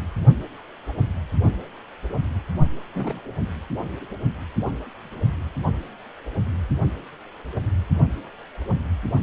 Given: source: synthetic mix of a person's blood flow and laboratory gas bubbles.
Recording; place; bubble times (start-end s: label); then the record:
Doppler ultrasound of blood flow; precordium
2.93-3.20 s: bubbles
From the record:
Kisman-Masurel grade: 112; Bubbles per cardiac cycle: 1 to 2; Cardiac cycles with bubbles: 1 to 10%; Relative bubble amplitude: moderate (0.250 to 0.450); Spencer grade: 1 (occasional bubble signal discernible with the cardiac motion signal, with majority of cardiac periods free of bubbles); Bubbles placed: only in the low amplitude regions of the cardiac cycle